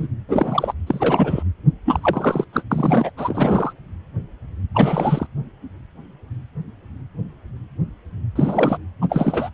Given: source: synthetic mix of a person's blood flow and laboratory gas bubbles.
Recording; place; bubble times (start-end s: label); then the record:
Doppler ultrasound of blood flow; precordium
0.00-0.08 s: bubbles
0.28-0.73 s: bubbles
0.87-1.43 s: bubbles
1.85-2.45 s: bubbles
2.52-2.62 s: bubbles
2.71-3.11 s: bubbles
3.17-3.73 s: bubbles
4.74-5.26 s: bubbles
8.36-8.78 s: bubbles
9.01-9.50 s: bubbles
From the record:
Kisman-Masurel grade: 333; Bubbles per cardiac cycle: rolling drumbeat, 9 or more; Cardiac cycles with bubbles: 50 to 99%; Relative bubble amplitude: loud (0.450 to 0.775); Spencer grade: 3 (all of the cardiac periods contain showers or single bubble signals, but not dominating or overriding the cardiac motion signals); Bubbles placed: anywhere in the cardiac cycle